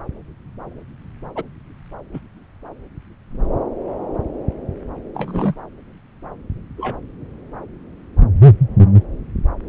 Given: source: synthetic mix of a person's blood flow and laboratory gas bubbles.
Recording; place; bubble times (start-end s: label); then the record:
Doppler ultrasound of blood flow; subclavian vein
1.35-1.43 s: bubbles
2.13-2.19 s: bubbles
5.14-5.54 s: bubbles
6.78-6.99 s: bubbles
From the record:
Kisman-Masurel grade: 122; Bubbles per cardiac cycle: 1 to 2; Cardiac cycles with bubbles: 10 to 50%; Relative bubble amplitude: moderate (0.250 to 0.450); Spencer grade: 2 (many but less than half of the cardiac periods contain bubble signals, singularly or in groups); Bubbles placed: anywhere in the cardiac cycle